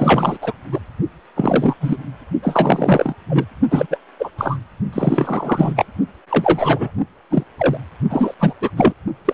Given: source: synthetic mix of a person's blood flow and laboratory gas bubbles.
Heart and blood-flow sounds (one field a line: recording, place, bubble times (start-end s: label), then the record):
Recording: Doppler ultrasound of blood flow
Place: precordium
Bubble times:
0.00-0.38 s: bubbles
0.42-0.53 s: bubbles
0.72-0.78 s: bubbles
1.35-1.76 s: bubbles
1.80-1.97 s: bubbles
2.42-3.14 s: bubbles
3.29-3.46 s: bubbles
3.71-3.87 s: bubbles
3.91-3.98 s: bubbles
4.20-4.29 s: bubbles
4.38-4.59 s: bubbles
4.92-5.86 s: bubbles
6.29-6.91 s: bubbles
7.30-7.44 s: bubbles
7.58-7.77 s: bubbles
8.09-8.34 s: bubbles
8.39-8.54 s: bubbles
8.61-8.70 s: bubbles
8.76-8.93 s: bubbles
9.25-9.34 s: bubbles
From the record:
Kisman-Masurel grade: 343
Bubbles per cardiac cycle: rolling drumbeat, 9 or more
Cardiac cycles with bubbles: 100%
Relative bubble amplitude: loud (0.450 to 0.775)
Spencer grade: 3 (all of the cardiac periods contain showers or single bubble signals, but not dominating or overriding the cardiac motion signals)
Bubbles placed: only in the low amplitude regions of the cardiac cycle